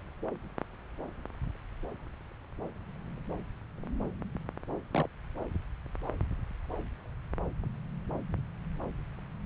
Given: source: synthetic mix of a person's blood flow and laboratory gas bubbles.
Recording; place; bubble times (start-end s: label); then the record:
Doppler ultrasound of blood flow; subclavian vein
4.92-5.07 s: bubbles
From the record:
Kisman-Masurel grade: 111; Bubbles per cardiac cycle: 1 to 2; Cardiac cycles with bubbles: 1 to 10%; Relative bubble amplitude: barely perceptible (0.100 to 0.250); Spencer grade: 1 (occasional bubble signal discernible with the cardiac motion signal, with majority of cardiac periods free of bubbles); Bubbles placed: anywhere in the cardiac cycle